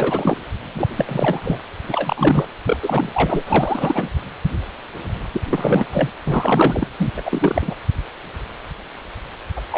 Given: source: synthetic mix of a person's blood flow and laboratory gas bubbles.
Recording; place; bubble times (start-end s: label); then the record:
Doppler ultrasound of blood flow; precordium
0.00-0.38 s: bubbles
0.74-0.88 s: bubbles
0.96-1.60 s: bubbles
1.84-2.46 s: bubbles
2.65-2.78 s: bubbles
2.82-3.10 s: bubbles
3.14-3.43 s: bubbles
3.47-4.09 s: bubbles
5.33-5.42 s: bubbles
5.50-5.86 s: bubbles
5.92-6.09 s: bubbles
6.25-6.87 s: bubbles
6.98-7.10 s: bubbles
7.17-7.21 s: bubbles
7.25-7.74 s: bubbles
9.56-9.62 s: bubbles
9.70-9.78 s: bubbles
From the record:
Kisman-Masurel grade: 333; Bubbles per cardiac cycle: rolling drumbeat, 9 or more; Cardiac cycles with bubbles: 50 to 99%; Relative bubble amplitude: loud (0.450 to 0.775); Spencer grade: 3 (all of the cardiac periods contain showers or single bubble signals, but not dominating or overriding the cardiac motion signals); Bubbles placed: anywhere in the cardiac cycle